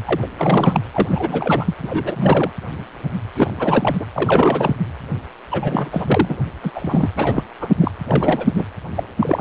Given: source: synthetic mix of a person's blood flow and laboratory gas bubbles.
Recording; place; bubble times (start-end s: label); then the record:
Doppler ultrasound of blood flow; precordium
0.05-0.27 s: bubbles
0.38-0.83 s: bubbles
0.92-1.75 s: bubbles
1.83-2.52 s: bubbles
3.36-3.54 s: bubbles
3.59-3.97 s: bubbles
4.00-4.06 s: bubbles
4.12-4.75 s: bubbles
5.50-6.38 s: bubbles
6.63-7.09 s: bubbles
7.16-7.44 s: bubbles
7.60-7.69 s: bubbles
7.80-7.91 s: bubbles
8.06-8.68 s: bubbles
8.95-9.04 s: bubbles
9.19-9.41 s: bubbles
From the record:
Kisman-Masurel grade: 333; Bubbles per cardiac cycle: rolling drumbeat, 9 or more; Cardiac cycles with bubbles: 50 to 99%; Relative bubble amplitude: loud (0.450 to 0.775); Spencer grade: 3 (all of the cardiac periods contain showers or single bubble signals, but not dominating or overriding the cardiac motion signals); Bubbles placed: anywhere in the cardiac cycle